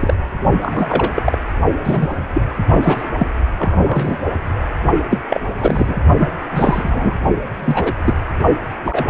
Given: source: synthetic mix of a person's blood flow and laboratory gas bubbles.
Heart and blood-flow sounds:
Doppler ultrasound of blood flow; precordium
0.00-0.14 s: bubbles
0.62-1.22 s: bubbles
1.25-1.38 s: bubbles
1.84-2.08 s: bubbles
2.33-2.42 s: bubbles
2.71-3.10 s: bubbles
3.19-3.27 s: bubbles
3.59-4.16 s: bubbles
5.10-5.19 s: bubbles
5.29-5.40 s: bubbles
5.61-5.96 s: bubbles
6.20-6.28 s: bubbles
6.52-7.15 s: bubbles
7.59-7.93 s: bubbles
8.04-8.14 s: bubbles
8.84-9.04 s: bubbles
From the record:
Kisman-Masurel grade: 243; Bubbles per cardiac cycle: several, 3 to 8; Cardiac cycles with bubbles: 100%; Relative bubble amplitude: loud (0.450 to 0.775); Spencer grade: 3 (all of the cardiac periods contain showers or single bubble signals, but not dominating or overriding the cardiac motion signals); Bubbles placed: only in the low amplitude regions of the cardiac cycle

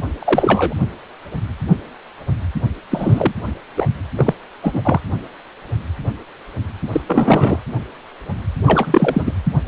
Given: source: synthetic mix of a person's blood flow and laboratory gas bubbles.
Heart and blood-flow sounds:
Doppler ultrasound of blood flow; precordium
0.19-0.74 s: bubbles
2.90-3.33 s: bubbles
3.77-3.88 s: bubbles
4.17-4.33 s: bubbles
4.62-5.00 s: bubbles
6.92-7.01 s: bubbles
7.06-7.59 s: bubbles
8.66-9.32 s: bubbles
From the record:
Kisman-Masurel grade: 223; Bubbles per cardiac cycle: several, 3 to 8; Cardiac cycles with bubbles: 10 to 50%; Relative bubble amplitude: loud (0.450 to 0.775); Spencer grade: 2 (many but less than half of the cardiac periods contain bubble signals, singularly or in groups); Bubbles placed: anywhere in the cardiac cycle

